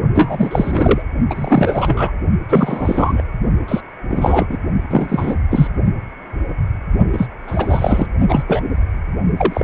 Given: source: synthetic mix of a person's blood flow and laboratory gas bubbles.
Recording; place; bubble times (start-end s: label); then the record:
Doppler ultrasound of blood flow; precordium
0.14-1.02 s: bubbles
1.30-2.12 s: bubbles
2.50-3.23 s: bubbles
3.68-3.81 s: bubbles
4.08-4.46 s: bubbles
4.49-4.57 s: bubbles
4.89-5.39 s: bubbles
5.50-5.67 s: bubbles
7.12-7.28 s: bubbles
7.47-8.06 s: bubbles
8.28-8.43 s: bubbles
8.47-8.63 s: bubbles
9.37-9.64 s: bubbles
From the record:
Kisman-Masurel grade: 333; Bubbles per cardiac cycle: rolling drumbeat, 9 or more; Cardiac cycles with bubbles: 50 to 99%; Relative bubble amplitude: loud (0.450 to 0.775); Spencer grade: 3 (all of the cardiac periods contain showers or single bubble signals, but not dominating or overriding the cardiac motion signals); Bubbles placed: only in the low amplitude regions of the cardiac cycle